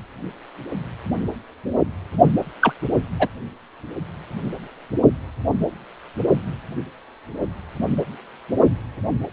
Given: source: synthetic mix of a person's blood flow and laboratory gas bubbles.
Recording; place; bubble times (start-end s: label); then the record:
Doppler ultrasound of blood flow; precordium
2.59-2.72 s: bubbles
3.19-3.28 s: bubbles
From the record:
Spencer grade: 1 (occasional bubble signal discernible with the cardiac motion signal, with majority of cardiac periods free of bubbles); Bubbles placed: only in the low amplitude regions of the cardiac cycle